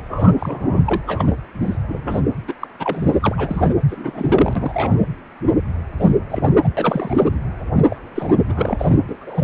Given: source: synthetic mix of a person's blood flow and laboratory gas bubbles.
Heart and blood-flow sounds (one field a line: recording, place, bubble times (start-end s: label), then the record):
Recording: Doppler ultrasound of blood flow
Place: precordium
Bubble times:
0.09-0.32 s: bubbles
0.39-0.81 s: bubbles
0.86-1.01 s: bubbles
1.07-1.35 s: bubbles
1.62-1.78 s: bubbles
1.88-2.24 s: bubbles
2.48-2.54 s: bubbles
2.60-2.68 s: bubbles
2.79-3.73 s: bubbles
3.88-5.00 s: bubbles
5.99-6.15 s: bubbles
6.30-6.53 s: bubbles
6.62-6.69 s: bubbles
6.77-7.27 s: bubbles
7.90-7.96 s: bubbles
8.15-8.45 s: bubbles
8.47-9.00 s: bubbles
9.07-9.16 s: bubbles
9.21-9.44 s: bubbles
From the record:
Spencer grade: 3 (all of the cardiac periods contain showers or single bubble signals, but not dominating or overriding the cardiac motion signals)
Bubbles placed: anywhere in the cardiac cycle